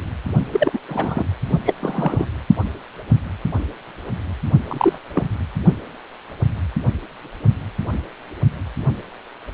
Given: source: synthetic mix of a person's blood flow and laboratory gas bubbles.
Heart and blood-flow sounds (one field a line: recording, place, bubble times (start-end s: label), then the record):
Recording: Doppler ultrasound of blood flow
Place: precordium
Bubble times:
0.52-0.79 s: bubbles
0.89-1.25 s: bubbles
1.65-1.74 s: bubbles
1.80-2.26 s: bubbles
4.69-4.98 s: bubbles
5.13-5.23 s: bubbles
From the record:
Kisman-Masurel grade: 222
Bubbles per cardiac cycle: several, 3 to 8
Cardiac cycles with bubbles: 10 to 50%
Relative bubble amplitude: moderate (0.250 to 0.450)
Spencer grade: 2 (many but less than half of the cardiac periods contain bubble signals, singularly or in groups)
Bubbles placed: only in the low amplitude regions of the cardiac cycle